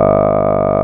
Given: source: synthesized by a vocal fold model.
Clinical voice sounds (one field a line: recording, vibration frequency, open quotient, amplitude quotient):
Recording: sustained vowel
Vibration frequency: 50 Hz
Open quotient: 0.2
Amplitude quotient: 1.4